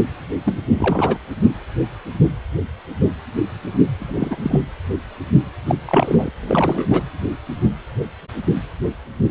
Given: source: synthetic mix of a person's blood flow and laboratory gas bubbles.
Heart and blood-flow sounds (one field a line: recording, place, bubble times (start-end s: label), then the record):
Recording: Doppler ultrasound of blood flow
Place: precordium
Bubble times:
0.45-0.59 s: bubbles
0.76-1.17 s: bubbles
3.99-4.60 s: bubbles
5.67-5.75 s: bubbles
5.87-6.31 s: bubbles
6.40-6.86 s: bubbles
6.90-7.03 s: bubbles
From the record:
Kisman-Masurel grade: 222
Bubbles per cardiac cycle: several, 3 to 8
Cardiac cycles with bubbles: 10 to 50%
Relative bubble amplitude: moderate (0.250 to 0.450)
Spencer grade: 2 (many but less than half of the cardiac periods contain bubble signals, singularly or in groups)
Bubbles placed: anywhere in the cardiac cycle